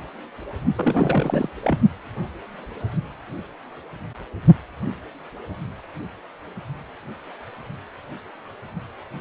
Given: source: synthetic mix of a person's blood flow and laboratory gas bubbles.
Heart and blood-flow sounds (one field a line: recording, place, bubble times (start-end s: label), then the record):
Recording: Doppler ultrasound of blood flow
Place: precordium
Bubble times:
0.76-1.49 s: bubbles
1.62-1.78 s: bubbles
From the record:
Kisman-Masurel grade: 212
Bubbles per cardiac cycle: several, 3 to 8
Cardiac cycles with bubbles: 1 to 10%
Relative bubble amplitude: moderate (0.250 to 0.450)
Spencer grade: 1 (occasional bubble signal discernible with the cardiac motion signal, with majority of cardiac periods free of bubbles)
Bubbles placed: only in the low amplitude regions of the cardiac cycle